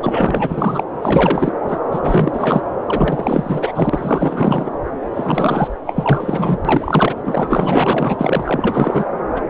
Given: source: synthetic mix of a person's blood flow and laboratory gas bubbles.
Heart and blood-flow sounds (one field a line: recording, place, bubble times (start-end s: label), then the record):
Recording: Doppler ultrasound of blood flow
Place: subclavian vein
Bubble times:
0.02-0.83 s: bubbles
1.00-1.52 s: bubbles
1.62-1.80 s: bubbles
1.91-2.61 s: bubbles
2.86-4.70 s: bubbles
5.15-5.68 s: bubbles
5.85-6.57 s: bubbles
6.65-7.15 s: bubbles
7.24-9.05 s: bubbles
9.36-9.42 s: bubbles
From the record:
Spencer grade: 4 (maximum detectable bubble signal sounding continuously throughout systole and diastole of every cardiac period, and overriding the amplitude of the normal cardiac signals)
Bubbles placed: anywhere in the cardiac cycle